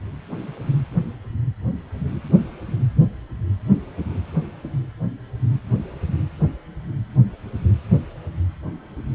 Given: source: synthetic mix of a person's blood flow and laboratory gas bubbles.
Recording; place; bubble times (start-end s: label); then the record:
Doppler ultrasound of blood flow; precordium
no bubbles
From the record:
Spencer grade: 0 (complete lack of bubble signals)